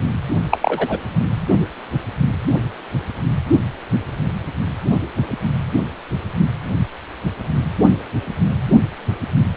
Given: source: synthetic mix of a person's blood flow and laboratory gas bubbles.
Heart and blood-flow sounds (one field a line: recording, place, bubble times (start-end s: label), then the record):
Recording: Doppler ultrasound of blood flow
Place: precordium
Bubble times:
0.51-0.58 s: bubbles
0.61-0.98 s: bubbles
From the record:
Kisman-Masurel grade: 213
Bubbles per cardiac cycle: several, 3 to 8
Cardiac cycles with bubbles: 1 to 10%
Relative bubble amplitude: loud (0.450 to 0.775)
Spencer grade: 1 (occasional bubble signal discernible with the cardiac motion signal, with majority of cardiac periods free of bubbles)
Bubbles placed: anywhere in the cardiac cycle